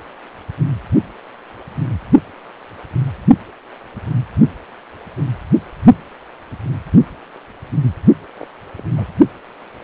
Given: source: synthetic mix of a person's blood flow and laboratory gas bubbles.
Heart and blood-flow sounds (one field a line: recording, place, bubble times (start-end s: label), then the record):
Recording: Doppler ultrasound of blood flow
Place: precordium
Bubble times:
8.37-8.48 s: bubbles
8.76-8.84 s: bubbles
8.96-9.06 s: bubbles
From the record:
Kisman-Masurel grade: 211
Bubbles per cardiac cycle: several, 3 to 8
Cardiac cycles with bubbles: 1 to 10%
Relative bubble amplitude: barely perceptible (0.100 to 0.250)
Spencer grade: 1 (occasional bubble signal discernible with the cardiac motion signal, with majority of cardiac periods free of bubbles)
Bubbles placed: only in the low amplitude regions of the cardiac cycle